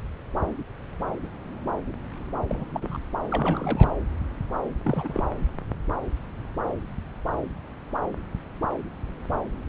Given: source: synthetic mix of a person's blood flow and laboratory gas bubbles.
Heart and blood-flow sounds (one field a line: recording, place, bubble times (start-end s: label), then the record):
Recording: Doppler ultrasound of blood flow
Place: subclavian vein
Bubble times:
2.48-2.65 s: bubbles
2.72-2.98 s: bubbles
3.28-3.94 s: bubbles
4.83-5.23 s: bubbles
From the record:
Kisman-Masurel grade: 221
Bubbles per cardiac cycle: several, 3 to 8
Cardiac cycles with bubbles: 10 to 50%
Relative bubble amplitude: barely perceptible (0.100 to 0.250)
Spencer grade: 2 (many but less than half of the cardiac periods contain bubble signals, singularly or in groups)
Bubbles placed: anywhere in the cardiac cycle